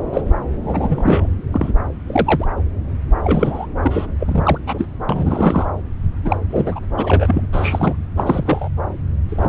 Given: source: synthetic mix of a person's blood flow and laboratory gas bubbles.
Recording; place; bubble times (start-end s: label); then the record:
Doppler ultrasound of blood flow; subclavian vein
0.12-0.22 s: bubbles
0.63-1.29 s: bubbles
1.52-1.72 s: bubbles
2.06-2.46 s: bubbles
3.23-3.67 s: bubbles
3.83-4.07 s: bubbles
4.19-4.58 s: bubbles
4.67-4.87 s: bubbles
5.09-5.67 s: bubbles
6.25-6.37 s: bubbles
6.50-6.79 s: bubbles
6.97-7.47 s: bubbles
7.53-7.97 s: bubbles
8.15-8.69 s: bubbles
9.29-9.49 s: bubbles
From the record:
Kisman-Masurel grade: 232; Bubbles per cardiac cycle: several, 3 to 8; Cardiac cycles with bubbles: 50 to 99%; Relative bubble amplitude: moderate (0.250 to 0.450); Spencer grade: 3 (all of the cardiac periods contain showers or single bubble signals, but not dominating or overriding the cardiac motion signals); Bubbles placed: anywhere in the cardiac cycle